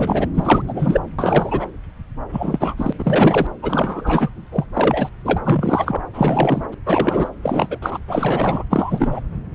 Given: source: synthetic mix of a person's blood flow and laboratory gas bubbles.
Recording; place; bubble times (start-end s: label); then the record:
Doppler ultrasound of blood flow; subclavian vein
0.00-0.28 s: bubbles
0.34-0.62 s: bubbles
0.67-1.00 s: bubbles
1.19-1.65 s: bubbles
2.32-2.92 s: bubbles
2.98-3.47 s: bubbles
3.62-4.29 s: bubbles
4.52-4.64 s: bubbles
4.73-5.09 s: bubbles
5.24-5.38 s: bubbles
5.45-6.03 s: bubbles
6.13-6.66 s: bubbles
6.71-6.75 s: bubbles
6.86-7.29 s: bubbles
7.43-7.79 s: bubbles
7.82-7.99 s: bubbles
8.07-8.64 s: bubbles
8.70-9.20 s: bubbles
From the record:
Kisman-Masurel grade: 333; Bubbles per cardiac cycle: rolling drumbeat, 9 or more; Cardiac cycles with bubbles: 50 to 99%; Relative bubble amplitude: loud (0.450 to 0.775); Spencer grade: 3 (all of the cardiac periods contain showers or single bubble signals, but not dominating or overriding the cardiac motion signals); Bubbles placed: anywhere in the cardiac cycle